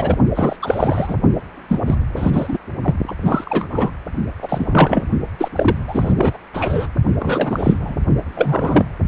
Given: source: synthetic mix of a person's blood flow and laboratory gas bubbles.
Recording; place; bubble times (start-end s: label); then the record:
Doppler ultrasound of blood flow; precordium
0.00-0.17 s: bubbles
0.35-0.56 s: bubbles
0.62-1.16 s: bubbles
1.68-1.95 s: bubbles
2.16-2.58 s: bubbles
2.83-2.95 s: bubbles
3.08-3.12 s: bubbles
3.23-3.67 s: bubbles
3.70-3.91 s: bubbles
4.42-5.04 s: bubbles
5.38-5.48 s: bubbles
5.55-5.77 s: bubbles
5.88-6.37 s: bubbles
6.54-6.87 s: bubbles
7.19-7.96 s: bubbles
8.29-8.85 s: bubbles
From the record:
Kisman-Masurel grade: 342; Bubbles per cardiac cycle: rolling drumbeat, 9 or more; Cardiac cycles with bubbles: 100%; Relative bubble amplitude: moderate (0.250 to 0.450); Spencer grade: 3 (all of the cardiac periods contain showers or single bubble signals, but not dominating or overriding the cardiac motion signals); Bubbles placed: only in the low amplitude regions of the cardiac cycle